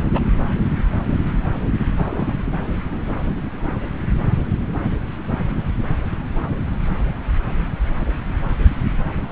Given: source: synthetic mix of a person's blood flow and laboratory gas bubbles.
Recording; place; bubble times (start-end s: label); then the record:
Doppler ultrasound of blood flow; subclavian vein
0.12-0.20 s: bubbles
1.97-2.34 s: bubbles
From the record:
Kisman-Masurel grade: 111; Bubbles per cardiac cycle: 1 to 2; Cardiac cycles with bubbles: 1 to 10%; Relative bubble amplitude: barely perceptible (0.100 to 0.250); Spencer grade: 1 (occasional bubble signal discernible with the cardiac motion signal, with majority of cardiac periods free of bubbles); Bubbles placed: anywhere in the cardiac cycle